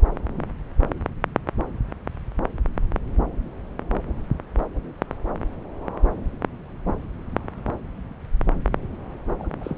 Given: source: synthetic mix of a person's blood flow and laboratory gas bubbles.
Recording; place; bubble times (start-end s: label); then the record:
Doppler ultrasound of blood flow; subclavian vein
9.38-9.47 s: bubbles
9.61-9.76 s: bubbles
From the record:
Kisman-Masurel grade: 211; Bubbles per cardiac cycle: several, 3 to 8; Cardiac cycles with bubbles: 1 to 10%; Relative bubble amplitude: barely perceptible (0.100 to 0.250); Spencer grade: 1 (occasional bubble signal discernible with the cardiac motion signal, with majority of cardiac periods free of bubbles); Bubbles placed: anywhere in the cardiac cycle